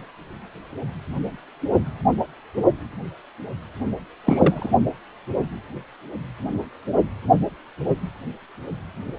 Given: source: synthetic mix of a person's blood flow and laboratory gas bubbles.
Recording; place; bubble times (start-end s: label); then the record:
Doppler ultrasound of blood flow; precordium
4.25-4.71 s: bubbles
From the record:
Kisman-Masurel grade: 213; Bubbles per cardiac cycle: several, 3 to 8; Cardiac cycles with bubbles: 1 to 10%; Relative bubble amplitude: loud (0.450 to 0.775); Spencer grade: 1 (occasional bubble signal discernible with the cardiac motion signal, with majority of cardiac periods free of bubbles); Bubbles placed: only in the low amplitude regions of the cardiac cycle